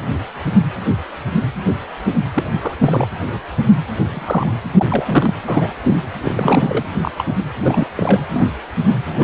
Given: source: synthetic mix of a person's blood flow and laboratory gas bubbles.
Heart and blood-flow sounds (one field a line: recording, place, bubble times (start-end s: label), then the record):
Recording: Doppler ultrasound of blood flow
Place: precordium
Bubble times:
2.34-2.43 s: bubbles
2.61-2.75 s: bubbles
2.79-3.08 s: bubbles
4.10-4.58 s: bubbles
4.76-4.85 s: bubbles
4.88-5.33 s: bubbles
5.46-5.68 s: bubbles
5.85-6.00 s: bubbles
6.21-6.85 s: bubbles
7.01-7.11 s: bubbles
7.17-7.34 s: bubbles
7.59-7.87 s: bubbles
7.96-8.20 s: bubbles
8.33-8.48 s: bubbles
9.09-9.23 s: bubbles
From the record:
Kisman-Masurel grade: 232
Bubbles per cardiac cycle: several, 3 to 8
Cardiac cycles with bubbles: 50 to 99%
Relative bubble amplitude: moderate (0.250 to 0.450)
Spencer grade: 3 (all of the cardiac periods contain showers or single bubble signals, but not dominating or overriding the cardiac motion signals)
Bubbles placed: anywhere in the cardiac cycle